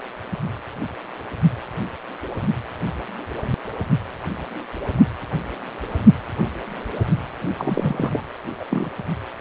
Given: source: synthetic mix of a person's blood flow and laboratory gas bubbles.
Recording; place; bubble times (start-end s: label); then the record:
Doppler ultrasound of blood flow; precordium
7.58-8.23 s: bubbles
8.60-8.65 s: bubbles
8.70-8.89 s: bubbles
From the record:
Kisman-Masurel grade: 222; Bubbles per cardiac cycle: several, 3 to 8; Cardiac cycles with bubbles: 10 to 50%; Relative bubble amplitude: moderate (0.250 to 0.450); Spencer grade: 2 (many but less than half of the cardiac periods contain bubble signals, singularly or in groups); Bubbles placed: only in the low amplitude regions of the cardiac cycle